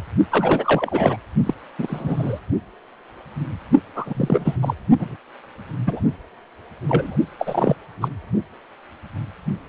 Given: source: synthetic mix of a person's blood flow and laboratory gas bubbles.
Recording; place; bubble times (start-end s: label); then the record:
Doppler ultrasound of blood flow; precordium
0.29-1.17 s: bubbles
1.46-1.54 s: bubbles
1.78-2.40 s: bubbles
3.95-4.57 s: bubbles
4.62-4.74 s: bubbles
4.99-5.16 s: bubbles
5.86-6.00 s: bubbles
6.88-7.17 s: bubbles
7.39-7.76 s: bubbles
8.01-8.08 s: bubbles
From the record:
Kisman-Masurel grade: 232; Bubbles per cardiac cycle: several, 3 to 8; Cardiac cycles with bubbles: 50 to 99%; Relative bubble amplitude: moderate (0.250 to 0.450); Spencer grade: 3 (all of the cardiac periods contain showers or single bubble signals, but not dominating or overriding the cardiac motion signals); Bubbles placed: only in the low amplitude regions of the cardiac cycle